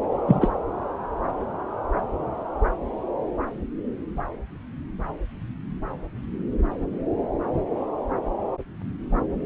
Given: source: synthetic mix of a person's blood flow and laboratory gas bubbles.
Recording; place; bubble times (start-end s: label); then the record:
Doppler ultrasound of blood flow; subclavian vein
0.27-0.50 s: bubbles
From the record:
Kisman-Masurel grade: 113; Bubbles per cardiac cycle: 1 to 2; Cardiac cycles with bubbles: 1 to 10%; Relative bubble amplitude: loud (0.450 to 0.775); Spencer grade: 1 (occasional bubble signal discernible with the cardiac motion signal, with majority of cardiac periods free of bubbles); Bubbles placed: anywhere in the cardiac cycle